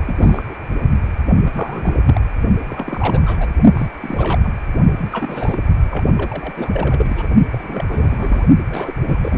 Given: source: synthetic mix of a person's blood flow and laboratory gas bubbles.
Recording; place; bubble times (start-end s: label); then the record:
Doppler ultrasound of blood flow; precordium
0.05-0.43 s: bubbles
0.49-0.55 s: bubbles
1.46-2.21 s: bubbles
2.65-3.21 s: bubbles
3.24-3.50 s: bubbles
3.75-3.87 s: bubbles
4.00-4.55 s: bubbles
4.96-5.77 s: bubbles
5.90-6.05 s: bubbles
6.17-7.28 s: bubbles
7.52-8.45 s: bubbles
8.70-9.38 s: bubbles
From the record:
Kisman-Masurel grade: 342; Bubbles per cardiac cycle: rolling drumbeat, 9 or more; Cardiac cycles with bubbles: 100%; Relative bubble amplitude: moderate (0.250 to 0.450); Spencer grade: 3 (all of the cardiac periods contain showers or single bubble signals, but not dominating or overriding the cardiac motion signals); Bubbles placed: only in the low amplitude regions of the cardiac cycle